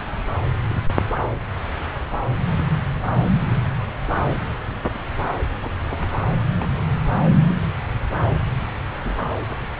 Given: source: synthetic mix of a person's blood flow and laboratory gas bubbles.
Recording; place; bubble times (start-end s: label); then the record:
Doppler ultrasound of blood flow; subclavian vein
0.53-0.57 s: bubbles
0.70-0.75 s: bubbles
5.62-5.71 s: bubbles
5.83-6.04 s: bubbles
6.56-6.84 s: bubbles
7.49-7.54 s: bubbles
9.04-9.15 s: bubbles
From the record:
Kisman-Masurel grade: 121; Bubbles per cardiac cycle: 1 to 2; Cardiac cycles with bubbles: 10 to 50%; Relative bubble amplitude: barely perceptible (0.100 to 0.250); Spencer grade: 2 (many but less than half of the cardiac periods contain bubble signals, singularly or in groups); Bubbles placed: anywhere in the cardiac cycle